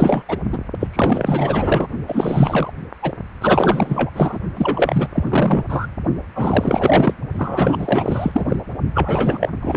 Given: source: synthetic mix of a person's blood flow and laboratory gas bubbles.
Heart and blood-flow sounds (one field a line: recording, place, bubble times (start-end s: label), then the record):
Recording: Doppler ultrasound of blood flow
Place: precordium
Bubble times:
0.00-0.23 s: bubbles
0.28-0.37 s: bubbles
0.52-0.58 s: bubbles
0.80-0.87 s: bubbles
0.91-1.87 s: bubbles
2.07-2.72 s: bubbles
3.02-3.12 s: bubbles
3.41-4.11 s: bubbles
4.14-4.39 s: bubbles
4.57-5.08 s: bubbles
5.13-5.65 s: bubbles
5.69-5.87 s: bubbles
6.35-7.14 s: bubbles
7.33-8.46 s: bubbles
8.48-8.56 s: bubbles
8.94-9.49 s: bubbles
9.62-9.77 s: bubbles
From the record:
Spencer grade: 4 (maximum detectable bubble signal sounding continuously throughout systole and diastole of every cardiac period, and overriding the amplitude of the normal cardiac signals)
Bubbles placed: only in the low amplitude regions of the cardiac cycle